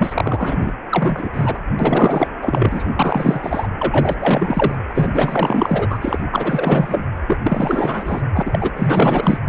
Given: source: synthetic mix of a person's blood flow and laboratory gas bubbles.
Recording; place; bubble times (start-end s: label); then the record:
Doppler ultrasound of blood flow; precordium
0.00-0.72 s: bubbles
0.89-1.29 s: bubbles
1.33-1.58 s: bubbles
1.79-2.31 s: bubbles
2.42-2.93 s: bubbles
2.96-3.68 s: bubbles
3.77-4.17 s: bubbles
4.19-4.75 s: bubbles
4.89-5.98 s: bubbles
6.01-6.25 s: bubbles
6.31-7.07 s: bubbles
7.27-7.37 s: bubbles
7.43-8.22 s: bubbles
8.34-8.42 s: bubbles
8.46-8.72 s: bubbles
8.75-9.38 s: bubbles
From the record:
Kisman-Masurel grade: 444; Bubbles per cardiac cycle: continuous sound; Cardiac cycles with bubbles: 100%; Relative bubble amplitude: maximal (0.775 to 0.999); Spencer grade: 4 (maximum detectable bubble signal sounding continuously throughout systole and diastole of every cardiac period, and overriding the amplitude of the normal cardiac signals); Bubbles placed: anywhere in the cardiac cycle